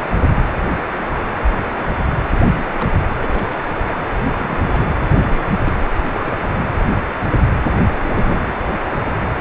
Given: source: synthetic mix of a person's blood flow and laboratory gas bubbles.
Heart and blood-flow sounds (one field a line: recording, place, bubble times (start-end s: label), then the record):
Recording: Doppler ultrasound of blood flow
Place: precordium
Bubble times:
2.55-2.70 s: bubbles
2.73-2.89 s: bubbles
3.20-3.56 s: bubbles
3.60-3.68 s: bubbles
3.75-3.84 s: bubbles
3.88-3.95 s: bubbles
4.36-4.57 s: bubbles
4.62-4.88 s: bubbles
5.09-5.52 s: bubbles
5.64-5.73 s: bubbles
5.79-5.85 s: bubbles
5.93-6.05 s: bubbles
6.09-6.36 s: bubbles
6.48-6.65 s: bubbles
7.92-7.98 s: bubbles
8.03-8.55 s: bubbles
8.92-9.00 s: bubbles
From the record:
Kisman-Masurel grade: 221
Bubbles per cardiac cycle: several, 3 to 8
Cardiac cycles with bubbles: 10 to 50%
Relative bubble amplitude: barely perceptible (0.100 to 0.250)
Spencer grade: 2 (many but less than half of the cardiac periods contain bubble signals, singularly or in groups)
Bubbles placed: anywhere in the cardiac cycle